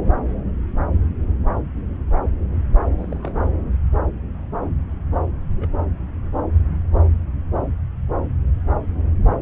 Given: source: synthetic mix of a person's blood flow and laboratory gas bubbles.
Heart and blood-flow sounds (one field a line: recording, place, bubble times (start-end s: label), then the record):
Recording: Doppler ultrasound of blood flow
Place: subclavian vein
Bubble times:
2.95-3.43 s: bubbles
5.26-5.50 s: bubbles
5.57-5.70 s: bubbles
From the record:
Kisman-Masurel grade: 221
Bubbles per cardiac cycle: several, 3 to 8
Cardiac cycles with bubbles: 10 to 50%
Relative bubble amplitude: barely perceptible (0.100 to 0.250)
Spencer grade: 2 (many but less than half of the cardiac periods contain bubble signals, singularly or in groups)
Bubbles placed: anywhere in the cardiac cycle